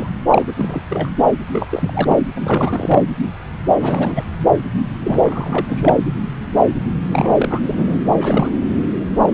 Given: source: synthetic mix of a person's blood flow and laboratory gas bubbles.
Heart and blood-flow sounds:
Doppler ultrasound of blood flow; subclavian vein
0.00-0.08 s: bubbles
0.30-0.44 s: bubbles
0.46-0.53 s: bubbles
0.56-0.82 s: bubbles
0.89-1.10 s: bubbles
1.52-1.66 s: bubbles
1.70-2.21 s: bubbles
2.34-3.02 s: bubbles
3.78-4.25 s: bubbles
5.04-5.66 s: bubbles
5.69-5.97 s: bubbles
7.10-7.60 s: bubbles
7.66-8.00 s: bubbles
8.16-8.51 s: bubbles
From the record:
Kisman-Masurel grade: 332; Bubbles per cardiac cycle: rolling drumbeat, 9 or more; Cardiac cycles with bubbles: 50 to 99%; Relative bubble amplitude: moderate (0.250 to 0.450); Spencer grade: 3 (all of the cardiac periods contain showers or single bubble signals, but not dominating or overriding the cardiac motion signals); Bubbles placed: anywhere in the cardiac cycle

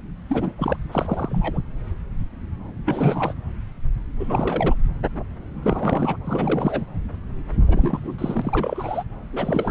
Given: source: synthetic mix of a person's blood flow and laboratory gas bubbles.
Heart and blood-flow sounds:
Doppler ultrasound of blood flow; subclavian vein
0.30-0.54 s: bubbles
0.58-0.77 s: bubbles
0.91-1.59 s: bubbles
2.85-3.33 s: bubbles
4.19-4.75 s: bubbles
5.62-6.17 s: bubbles
6.24-6.85 s: bubbles
7.68-8.00 s: bubbles
8.03-9.04 s: bubbles
9.33-9.71 s: bubbles
From the record:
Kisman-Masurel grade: 332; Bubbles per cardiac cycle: rolling drumbeat, 9 or more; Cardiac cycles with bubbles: 50 to 99%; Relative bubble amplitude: moderate (0.250 to 0.450); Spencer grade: 3 (all of the cardiac periods contain showers or single bubble signals, but not dominating or overriding the cardiac motion signals); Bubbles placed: anywhere in the cardiac cycle

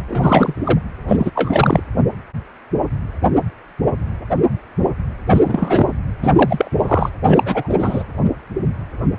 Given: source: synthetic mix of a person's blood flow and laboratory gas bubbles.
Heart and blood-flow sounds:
Doppler ultrasound of blood flow; precordium
0.08-0.79 s: bubbles
1.08-1.31 s: bubbles
1.35-1.82 s: bubbles
5.30-5.41 s: bubbles
5.45-5.98 s: bubbles
6.22-6.32 s: bubbles
6.36-7.12 s: bubbles
7.25-8.04 s: bubbles
From the record:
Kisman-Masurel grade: 333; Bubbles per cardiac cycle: rolling drumbeat, 9 or more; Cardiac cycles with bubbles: 50 to 99%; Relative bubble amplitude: loud (0.450 to 0.775); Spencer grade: 3 (all of the cardiac periods contain showers or single bubble signals, but not dominating or overriding the cardiac motion signals); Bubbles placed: anywhere in the cardiac cycle

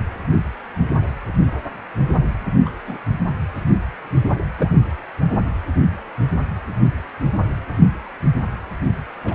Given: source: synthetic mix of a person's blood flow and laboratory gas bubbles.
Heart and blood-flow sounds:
Doppler ultrasound of blood flow; precordium
2.65-2.69 s: bubbles
2.87-2.98 s: bubbles
4.58-4.70 s: bubbles
9.25-9.35 s: bubbles
From the record:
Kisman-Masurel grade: 122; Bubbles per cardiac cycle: 1 to 2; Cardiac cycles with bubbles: 10 to 50%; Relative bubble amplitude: moderate (0.250 to 0.450); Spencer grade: 2 (many but less than half of the cardiac periods contain bubble signals, singularly or in groups); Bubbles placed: anywhere in the cardiac cycle

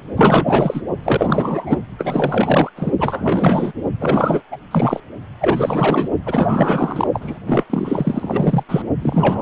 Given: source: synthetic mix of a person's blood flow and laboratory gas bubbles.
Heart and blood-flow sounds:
Doppler ultrasound of blood flow; precordium
0.16-0.81 s: bubbles
1.03-1.78 s: bubbles
1.98-2.70 s: bubbles
2.76-2.92 s: bubbles
2.98-3.72 s: bubbles
4.00-4.42 s: bubbles
4.51-4.57 s: bubbles
4.71-5.00 s: bubbles
5.41-6.09 s: bubbles
6.25-7.08 s: bubbles
7.12-7.39 s: bubbles
7.46-7.64 s: bubbles
7.70-8.63 s: bubbles
8.68-8.82 s: bubbles
9.02-9.42 s: bubbles
From the record:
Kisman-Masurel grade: 444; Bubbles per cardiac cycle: continuous sound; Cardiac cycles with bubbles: 100%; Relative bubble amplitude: maximal (0.775 to 0.999); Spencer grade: 4 (maximum detectable bubble signal sounding continuously throughout systole and diastole of every cardiac period, and overriding the amplitude of the normal cardiac signals); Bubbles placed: only in the low amplitude regions of the cardiac cycle

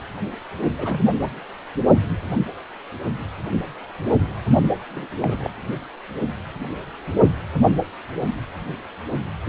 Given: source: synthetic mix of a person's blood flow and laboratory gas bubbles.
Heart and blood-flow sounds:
Doppler ultrasound of blood flow; precordium
0.77-1.01 s: bubbles
1.22-1.29 s: bubbles
4.90-5.08 s: bubbles
5.21-5.50 s: bubbles
From the record:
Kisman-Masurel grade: 221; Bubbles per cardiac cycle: several, 3 to 8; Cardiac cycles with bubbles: 10 to 50%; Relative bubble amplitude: barely perceptible (0.100 to 0.250); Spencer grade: 2 (many but less than half of the cardiac periods contain bubble signals, singularly or in groups); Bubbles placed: only in the low amplitude regions of the cardiac cycle

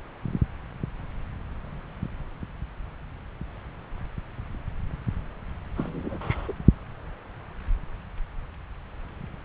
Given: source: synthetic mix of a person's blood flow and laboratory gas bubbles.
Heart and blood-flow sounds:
Doppler ultrasound of blood flow; subclavian vein
5.75-6.52 s: bubbles
From the record:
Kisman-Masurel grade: 212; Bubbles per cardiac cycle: several, 3 to 8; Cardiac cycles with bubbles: 1 to 10%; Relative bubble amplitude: moderate (0.250 to 0.450); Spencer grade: 1 (occasional bubble signal discernible with the cardiac motion signal, with majority of cardiac periods free of bubbles); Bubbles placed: anywhere in the cardiac cycle

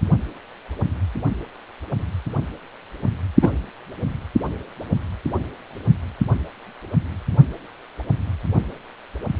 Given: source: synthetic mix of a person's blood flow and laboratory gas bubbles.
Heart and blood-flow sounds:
Doppler ultrasound of blood flow; precordium
3.42-3.52 s: bubbles
From the record:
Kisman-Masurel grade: 113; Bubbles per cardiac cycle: 1 to 2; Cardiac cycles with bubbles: 1 to 10%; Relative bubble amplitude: loud (0.450 to 0.775); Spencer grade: 1 (occasional bubble signal discernible with the cardiac motion signal, with majority of cardiac periods free of bubbles); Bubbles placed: only in the low amplitude regions of the cardiac cycle

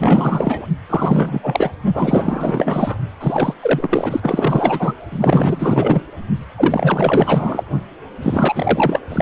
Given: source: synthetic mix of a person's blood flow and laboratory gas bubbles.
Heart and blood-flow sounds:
Doppler ultrasound of blood flow; precordium
0.00-0.67 s: bubbles
0.89-1.71 s: bubbles
1.94-2.97 s: bubbles
3.21-3.54 s: bubbles
3.61-4.94 s: bubbles
5.12-6.04 s: bubbles
6.57-7.63 s: bubbles
8.21-9.01 s: bubbles
9.09-9.22 s: bubbles
From the record:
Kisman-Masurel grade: 444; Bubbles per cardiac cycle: continuous sound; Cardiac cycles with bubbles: 100%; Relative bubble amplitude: maximal (0.775 to 0.999); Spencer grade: 4 (maximum detectable bubble signal sounding continuously throughout systole and diastole of every cardiac period, and overriding the amplitude of the normal cardiac signals); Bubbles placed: only in the low amplitude regions of the cardiac cycle

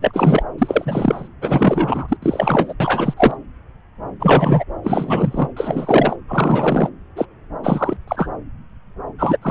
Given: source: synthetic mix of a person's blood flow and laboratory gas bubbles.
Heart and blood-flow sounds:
Doppler ultrasound of blood flow; subclavian vein
0.01-0.43 s: bubbles
0.58-1.28 s: bubbles
1.41-2.17 s: bubbles
2.22-2.73 s: bubbles
2.80-3.14 s: bubbles
3.17-3.36 s: bubbles
4.19-4.64 s: bubbles
4.83-5.48 s: bubbles
5.56-6.16 s: bubbles
6.27-6.89 s: bubbles
7.15-7.25 s: bubbles
7.63-7.97 s: bubbles
8.07-8.28 s: bubbles
9.19-9.37 s: bubbles
9.41-9.51 s: bubbles
From the record:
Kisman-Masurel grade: 333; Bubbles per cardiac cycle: rolling drumbeat, 9 or more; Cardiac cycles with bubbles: 50 to 99%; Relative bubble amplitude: loud (0.450 to 0.775); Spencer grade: 3 (all of the cardiac periods contain showers or single bubble signals, but not dominating or overriding the cardiac motion signals); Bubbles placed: anywhere in the cardiac cycle

